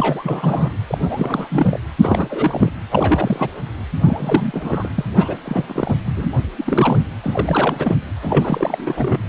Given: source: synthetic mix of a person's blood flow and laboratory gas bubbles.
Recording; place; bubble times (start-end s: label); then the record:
Doppler ultrasound of blood flow; precordium
0.00-0.70 s: bubbles
0.87-0.98 s: bubbles
1.09-1.78 s: bubbles
2.01-2.72 s: bubbles
2.91-3.50 s: bubbles
4.03-4.89 s: bubbles
4.95-5.04 s: bubbles
5.15-5.38 s: bubbles
5.44-5.94 s: bubbles
6.05-6.27 s: bubbles
6.33-6.38 s: bubbles
6.57-7.01 s: bubbles
7.23-7.96 s: bubbles
8.21-9.18 s: bubbles
From the record:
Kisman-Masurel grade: 332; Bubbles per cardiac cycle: rolling drumbeat, 9 or more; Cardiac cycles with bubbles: 50 to 99%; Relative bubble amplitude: moderate (0.250 to 0.450); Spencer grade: 3 (all of the cardiac periods contain showers or single bubble signals, but not dominating or overriding the cardiac motion signals); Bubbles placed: anywhere in the cardiac cycle